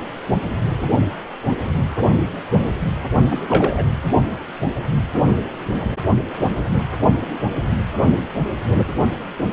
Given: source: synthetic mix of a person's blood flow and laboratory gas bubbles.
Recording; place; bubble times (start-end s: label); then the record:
Doppler ultrasound of blood flow; precordium
3.30-3.87 s: bubbles
From the record:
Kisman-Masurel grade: 222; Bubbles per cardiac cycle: several, 3 to 8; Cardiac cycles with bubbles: 10 to 50%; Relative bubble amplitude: moderate (0.250 to 0.450); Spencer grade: 2 (many but less than half of the cardiac periods contain bubble signals, singularly or in groups); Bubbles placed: anywhere in the cardiac cycle